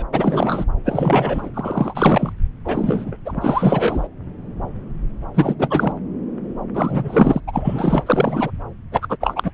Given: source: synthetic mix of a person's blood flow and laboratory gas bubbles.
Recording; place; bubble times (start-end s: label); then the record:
Doppler ultrasound of blood flow; subclavian vein
0.00-0.05 s: bubbles
0.12-0.65 s: bubbles
0.85-1.50 s: bubbles
1.54-2.33 s: bubbles
2.65-3.18 s: bubbles
3.25-4.07 s: bubbles
5.34-5.55 s: bubbles
5.58-5.93 s: bubbles
6.74-7.40 s: bubbles
7.47-8.04 s: bubbles
8.06-8.51 s: bubbles
8.91-9.16 s: bubbles
9.21-9.51 s: bubbles
From the record:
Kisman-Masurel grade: 333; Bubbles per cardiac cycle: rolling drumbeat, 9 or more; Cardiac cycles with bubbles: 50 to 99%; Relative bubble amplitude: loud (0.450 to 0.775); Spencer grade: 3 (all of the cardiac periods contain showers or single bubble signals, but not dominating or overriding the cardiac motion signals); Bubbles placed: anywhere in the cardiac cycle